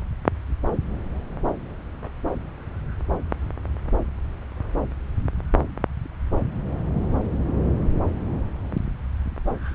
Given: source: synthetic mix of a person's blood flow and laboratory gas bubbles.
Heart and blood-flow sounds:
Doppler ultrasound of blood flow; subclavian vein
no bubbles
From the record:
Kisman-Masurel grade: 000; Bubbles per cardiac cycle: 0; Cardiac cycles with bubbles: 0%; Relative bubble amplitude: no bubbles discernible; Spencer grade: 0 (complete lack of bubble signals)

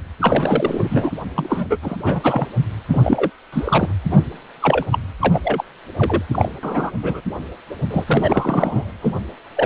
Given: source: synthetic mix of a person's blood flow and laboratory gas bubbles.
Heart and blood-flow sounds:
Doppler ultrasound of blood flow; precordium
0.21-1.10 s: bubbles
1.35-1.66 s: bubbles
1.69-1.77 s: bubbles
1.82-1.96 s: bubbles
2.04-2.21 s: bubbles
2.23-2.46 s: bubbles
2.89-3.30 s: bubbles
3.52-3.93 s: bubbles
4.10-4.22 s: bubbles
4.62-4.85 s: bubbles
4.91-4.99 s: bubbles
5.20-5.41 s: bubbles
5.43-5.64 s: bubbles
5.96-6.22 s: bubbles
6.31-6.49 s: bubbles
6.63-6.92 s: bubbles
7.02-7.21 s: bubbles
7.90-8.04 s: bubbles
8.06-8.92 s: bubbles
9.02-9.15 s: bubbles
9.56-9.66 s: bubbles
From the record:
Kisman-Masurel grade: 343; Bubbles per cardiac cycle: rolling drumbeat, 9 or more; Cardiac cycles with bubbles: 100%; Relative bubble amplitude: loud (0.450 to 0.775); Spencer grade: 3 (all of the cardiac periods contain showers or single bubble signals, but not dominating or overriding the cardiac motion signals); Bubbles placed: anywhere in the cardiac cycle

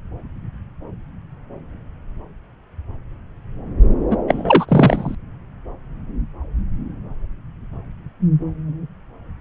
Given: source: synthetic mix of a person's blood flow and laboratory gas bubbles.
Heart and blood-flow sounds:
Doppler ultrasound of blood flow; subclavian vein
4.10-4.17 s: bubbles
4.27-4.66 s: bubbles
4.68-5.15 s: bubbles
From the record:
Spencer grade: 2 (many but less than half of the cardiac periods contain bubble signals, singularly or in groups); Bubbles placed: anywhere in the cardiac cycle

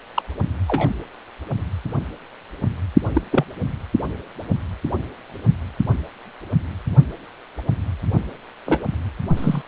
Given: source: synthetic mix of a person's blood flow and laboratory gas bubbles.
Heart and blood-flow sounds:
Doppler ultrasound of blood flow; precordium
0.14-0.22 s: bubbles
0.67-0.91 s: bubbles
3.15-3.21 s: bubbles
3.31-3.44 s: bubbles
8.66-8.82 s: bubbles
9.37-9.62 s: bubbles
From the record:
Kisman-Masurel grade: 122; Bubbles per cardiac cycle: 1 to 2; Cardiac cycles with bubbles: 10 to 50%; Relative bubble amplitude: moderate (0.250 to 0.450); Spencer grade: 2 (many but less than half of the cardiac periods contain bubble signals, singularly or in groups); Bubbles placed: only in the low amplitude regions of the cardiac cycle

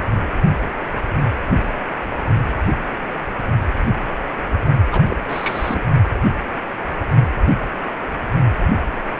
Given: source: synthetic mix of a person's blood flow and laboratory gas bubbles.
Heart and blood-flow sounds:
Doppler ultrasound of blood flow; precordium
4.91-5.02 s: bubbles
5.08-5.17 s: bubbles
5.29-5.81 s: bubbles
From the record:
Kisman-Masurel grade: 222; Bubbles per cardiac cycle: several, 3 to 8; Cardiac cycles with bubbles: 10 to 50%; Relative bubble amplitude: moderate (0.250 to 0.450); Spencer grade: 2 (many but less than half of the cardiac periods contain bubble signals, singularly or in groups); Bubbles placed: anywhere in the cardiac cycle

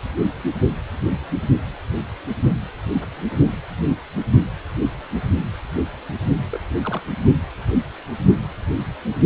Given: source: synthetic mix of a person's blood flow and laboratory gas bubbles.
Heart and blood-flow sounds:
Doppler ultrasound of blood flow; precordium
6.51-6.59 s: bubbles
6.84-7.02 s: bubbles
From the record:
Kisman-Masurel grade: 211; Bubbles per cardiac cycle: several, 3 to 8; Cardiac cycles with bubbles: 1 to 10%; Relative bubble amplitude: barely perceptible (0.100 to 0.250); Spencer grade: 1 (occasional bubble signal discernible with the cardiac motion signal, with majority of cardiac periods free of bubbles); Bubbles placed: only in the low amplitude regions of the cardiac cycle

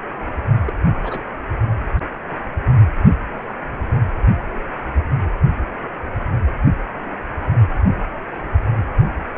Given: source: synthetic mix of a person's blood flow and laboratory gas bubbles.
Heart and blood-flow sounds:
Doppler ultrasound of blood flow; precordium
0.65-0.73 s: bubbles
1.01-1.24 s: bubbles
From the record:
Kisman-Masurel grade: 111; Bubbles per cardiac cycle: 1 to 2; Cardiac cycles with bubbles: 1 to 10%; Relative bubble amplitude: barely perceptible (0.100 to 0.250); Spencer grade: 1 (occasional bubble signal discernible with the cardiac motion signal, with majority of cardiac periods free of bubbles); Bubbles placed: anywhere in the cardiac cycle

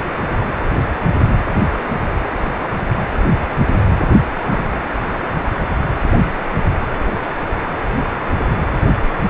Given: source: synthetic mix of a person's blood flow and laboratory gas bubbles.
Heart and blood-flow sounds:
Doppler ultrasound of blood flow; precordium
4.49-4.81 s: bubbles
From the record:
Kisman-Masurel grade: 211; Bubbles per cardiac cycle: several, 3 to 8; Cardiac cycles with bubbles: 1 to 10%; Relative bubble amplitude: barely perceptible (0.100 to 0.250); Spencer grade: 1 (occasional bubble signal discernible with the cardiac motion signal, with majority of cardiac periods free of bubbles); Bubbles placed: anywhere in the cardiac cycle

